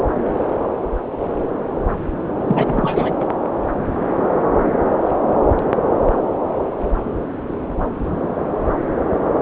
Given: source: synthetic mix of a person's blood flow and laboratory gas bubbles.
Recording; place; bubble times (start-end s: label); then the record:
Doppler ultrasound of blood flow; subclavian vein
2.46-3.15 s: bubbles
3.19-3.27 s: bubbles
From the record:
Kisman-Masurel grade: 212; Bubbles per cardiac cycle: several, 3 to 8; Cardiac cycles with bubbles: 1 to 10%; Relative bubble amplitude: moderate (0.250 to 0.450); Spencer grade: 1 (occasional bubble signal discernible with the cardiac motion signal, with majority of cardiac periods free of bubbles); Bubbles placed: anywhere in the cardiac cycle